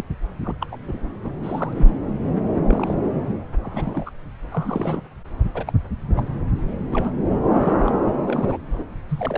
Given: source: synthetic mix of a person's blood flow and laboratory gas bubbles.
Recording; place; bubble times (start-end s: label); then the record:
Doppler ultrasound of blood flow; subclavian vein
0.00-0.03 s: bubbles
0.41-0.55 s: bubbles
0.60-0.67 s: bubbles
0.71-0.77 s: bubbles
0.88-0.97 s: bubbles
1.23-1.30 s: bubbles
1.43-1.90 s: bubbles
2.67-2.94 s: bubbles
3.63-4.10 s: bubbles
4.51-5.01 s: bubbles
5.54-5.72 s: bubbles
6.14-6.25 s: bubbles
6.91-7.13 s: bubbles
7.49-8.00 s: bubbles
8.26-8.57 s: bubbles
8.66-8.85 s: bubbles
9.09-9.38 s: bubbles
From the record:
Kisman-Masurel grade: 242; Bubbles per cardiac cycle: several, 3 to 8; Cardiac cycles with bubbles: 100%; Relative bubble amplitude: moderate (0.250 to 0.450); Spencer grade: 3 (all of the cardiac periods contain showers or single bubble signals, but not dominating or overriding the cardiac motion signals); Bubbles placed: anywhere in the cardiac cycle